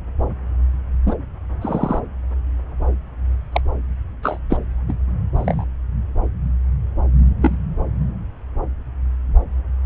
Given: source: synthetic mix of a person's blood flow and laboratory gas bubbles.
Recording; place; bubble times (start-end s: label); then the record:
Doppler ultrasound of blood flow; subclavian vein
1.06-1.14 s: bubbles
1.61-2.00 s: bubbles
3.52-3.61 s: bubbles
4.22-4.39 s: bubbles
4.50-4.57 s: bubbles
4.88-4.93 s: bubbles
5.35-5.64 s: bubbles
7.41-7.58 s: bubbles
From the record:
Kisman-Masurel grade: 122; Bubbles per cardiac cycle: 1 to 2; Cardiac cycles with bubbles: 10 to 50%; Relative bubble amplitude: moderate (0.250 to 0.450); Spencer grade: 2 (many but less than half of the cardiac periods contain bubble signals, singularly or in groups); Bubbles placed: anywhere in the cardiac cycle